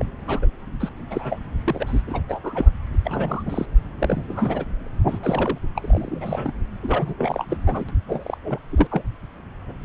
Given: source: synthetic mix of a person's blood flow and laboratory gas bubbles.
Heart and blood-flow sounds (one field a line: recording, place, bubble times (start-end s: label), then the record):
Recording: Doppler ultrasound of blood flow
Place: subclavian vein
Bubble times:
0.00-0.06 s: bubbles
0.27-0.46 s: bubbles
0.79-0.89 s: bubbles
1.10-1.38 s: bubbles
1.66-2.02 s: bubbles
2.06-2.21 s: bubbles
2.27-2.40 s: bubbles
2.44-2.71 s: bubbles
3.04-3.43 s: bubbles
3.46-3.66 s: bubbles
3.99-4.25 s: bubbles
4.29-4.66 s: bubbles
5.08-5.18 s: bubbles
5.21-5.58 s: bubbles
5.75-6.53 s: bubbles
6.82-7.14 s: bubbles
7.17-7.45 s: bubbles
7.50-7.58 s: bubbles
7.66-7.84 s: bubbles
7.88-7.92 s: bubbles
8.08-8.38 s: bubbles
8.44-8.59 s: bubbles
8.70-9.02 s: bubbles
From the record:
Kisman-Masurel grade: 242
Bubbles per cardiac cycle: several, 3 to 8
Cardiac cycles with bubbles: 100%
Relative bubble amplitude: moderate (0.250 to 0.450)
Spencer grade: 3 (all of the cardiac periods contain showers or single bubble signals, but not dominating or overriding the cardiac motion signals)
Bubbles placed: anywhere in the cardiac cycle